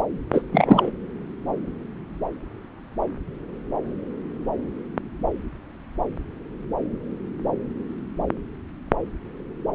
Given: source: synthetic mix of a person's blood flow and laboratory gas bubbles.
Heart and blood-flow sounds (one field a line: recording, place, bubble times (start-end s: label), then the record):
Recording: Doppler ultrasound of blood flow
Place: subclavian vein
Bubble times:
0.32-0.41 s: bubbles
0.51-0.91 s: bubbles
From the record:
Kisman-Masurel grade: 212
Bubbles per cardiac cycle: several, 3 to 8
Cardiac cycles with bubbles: 1 to 10%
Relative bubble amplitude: moderate (0.250 to 0.450)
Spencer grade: 1 (occasional bubble signal discernible with the cardiac motion signal, with majority of cardiac periods free of bubbles)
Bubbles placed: anywhere in the cardiac cycle